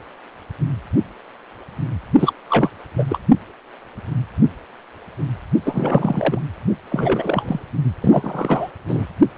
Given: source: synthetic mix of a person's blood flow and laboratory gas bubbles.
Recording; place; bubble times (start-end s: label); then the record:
Doppler ultrasound of blood flow; precordium
2.19-2.33 s: bubbles
2.50-2.69 s: bubbles
2.96-3.04 s: bubbles
3.10-3.19 s: bubbles
5.65-6.43 s: bubbles
6.90-7.66 s: bubbles
8.02-8.70 s: bubbles
8.88-9.06 s: bubbles
From the record:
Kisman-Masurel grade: 333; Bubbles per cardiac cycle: rolling drumbeat, 9 or more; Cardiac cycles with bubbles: 50 to 99%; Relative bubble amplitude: loud (0.450 to 0.775); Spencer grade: 3 (all of the cardiac periods contain showers or single bubble signals, but not dominating or overriding the cardiac motion signals); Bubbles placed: only in the low amplitude regions of the cardiac cycle